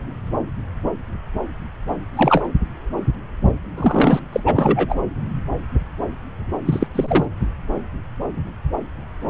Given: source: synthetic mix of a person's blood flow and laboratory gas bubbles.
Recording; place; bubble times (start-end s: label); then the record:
Doppler ultrasound of blood flow; subclavian vein
2.13-2.46 s: bubbles
3.76-4.20 s: bubbles
4.32-4.41 s: bubbles
4.46-4.98 s: bubbles
6.65-6.87 s: bubbles
6.95-7.26 s: bubbles
From the record:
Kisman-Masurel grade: 223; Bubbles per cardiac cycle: several, 3 to 8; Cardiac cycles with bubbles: 10 to 50%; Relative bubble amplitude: loud (0.450 to 0.775); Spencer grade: 2 (many but less than half of the cardiac periods contain bubble signals, singularly or in groups); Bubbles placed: anywhere in the cardiac cycle